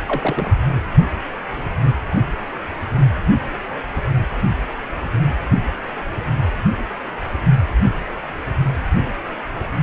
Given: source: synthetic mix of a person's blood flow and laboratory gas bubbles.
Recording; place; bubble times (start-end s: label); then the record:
Doppler ultrasound of blood flow; precordium
0.05-0.53 s: bubbles
From the record:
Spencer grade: 2 (many but less than half of the cardiac periods contain bubble signals, singularly or in groups); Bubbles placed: only in the low amplitude regions of the cardiac cycle